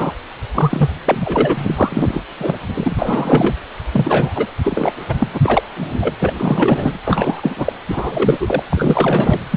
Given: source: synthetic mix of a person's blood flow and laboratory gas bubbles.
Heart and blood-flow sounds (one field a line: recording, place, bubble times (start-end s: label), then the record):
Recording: Doppler ultrasound of blood flow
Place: precordium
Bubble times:
0.00-0.12 s: bubbles
0.54-0.90 s: bubbles
1.05-2.23 s: bubbles
2.38-2.56 s: bubbles
2.61-3.54 s: bubbles
3.92-4.33 s: bubbles
4.35-4.46 s: bubbles
4.64-4.92 s: bubbles
5.09-5.15 s: bubbles
5.19-5.29 s: bubbles
5.33-5.40 s: bubbles
5.43-5.62 s: bubbles
5.76-6.15 s: bubbles
6.19-6.34 s: bubbles
6.40-6.99 s: bubbles
7.05-7.73 s: bubbles
7.88-8.63 s: bubbles
8.70-9.39 s: bubbles
9.51-9.56 s: bubbles
From the record:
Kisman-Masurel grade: 343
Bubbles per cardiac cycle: rolling drumbeat, 9 or more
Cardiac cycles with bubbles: 100%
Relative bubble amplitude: loud (0.450 to 0.775)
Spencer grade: 3 (all of the cardiac periods contain showers or single bubble signals, but not dominating or overriding the cardiac motion signals)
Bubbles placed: anywhere in the cardiac cycle